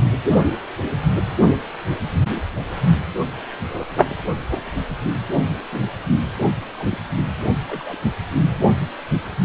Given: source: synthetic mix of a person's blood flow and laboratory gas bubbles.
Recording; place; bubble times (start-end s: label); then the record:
Doppler ultrasound of blood flow; precordium
0.35-0.43 s: bubbles
5.72-5.83 s: bubbles
6.72-6.98 s: bubbles
7.67-7.97 s: bubbles
From the record:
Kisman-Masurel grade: 121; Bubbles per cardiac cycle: 1 to 2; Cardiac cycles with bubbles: 10 to 50%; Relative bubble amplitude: barely perceptible (0.100 to 0.250); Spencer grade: 2 (many but less than half of the cardiac periods contain bubble signals, singularly or in groups); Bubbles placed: anywhere in the cardiac cycle